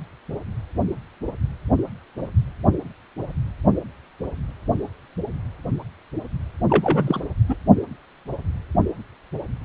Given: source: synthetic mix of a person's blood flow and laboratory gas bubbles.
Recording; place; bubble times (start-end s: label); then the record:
Doppler ultrasound of blood flow; precordium
6.69-7.21 s: bubbles
7.48-7.56 s: bubbles
From the record:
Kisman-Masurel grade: 212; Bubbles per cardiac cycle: several, 3 to 8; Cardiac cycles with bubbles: 1 to 10%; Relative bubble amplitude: moderate (0.250 to 0.450); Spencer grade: 1 (occasional bubble signal discernible with the cardiac motion signal, with majority of cardiac periods free of bubbles); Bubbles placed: anywhere in the cardiac cycle